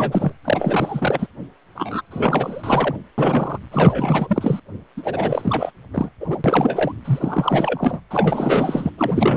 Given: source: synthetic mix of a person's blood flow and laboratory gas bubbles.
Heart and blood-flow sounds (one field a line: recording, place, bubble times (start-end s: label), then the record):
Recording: Doppler ultrasound of blood flow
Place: precordium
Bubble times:
0.00-0.33 s: bubbles
0.45-1.27 s: bubbles
1.75-2.01 s: bubbles
2.10-2.95 s: bubbles
3.17-3.58 s: bubbles
3.71-4.60 s: bubbles
4.97-5.71 s: bubbles
5.93-6.10 s: bubbles
6.20-6.93 s: bubbles
7.04-8.00 s: bubbles
8.10-8.91 s: bubbles
8.97-9.37 s: bubbles
From the record:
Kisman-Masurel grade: 444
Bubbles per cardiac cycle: continuous sound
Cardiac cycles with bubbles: 100%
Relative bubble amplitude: maximal (0.775 to 0.999)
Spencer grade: 4 (maximum detectable bubble signal sounding continuously throughout systole and diastole of every cardiac period, and overriding the amplitude of the normal cardiac signals)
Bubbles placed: anywhere in the cardiac cycle